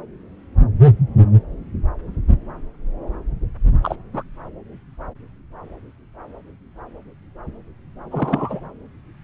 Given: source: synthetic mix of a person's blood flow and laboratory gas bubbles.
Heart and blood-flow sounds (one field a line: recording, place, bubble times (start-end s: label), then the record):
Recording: Doppler ultrasound of blood flow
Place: subclavian vein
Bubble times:
3.82-3.96 s: bubbles
4.12-4.23 s: bubbles
8.11-8.60 s: bubbles
From the record:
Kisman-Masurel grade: 222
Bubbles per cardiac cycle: several, 3 to 8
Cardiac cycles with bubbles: 10 to 50%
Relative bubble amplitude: moderate (0.250 to 0.450)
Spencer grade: 2 (many but less than half of the cardiac periods contain bubble signals, singularly or in groups)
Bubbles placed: anywhere in the cardiac cycle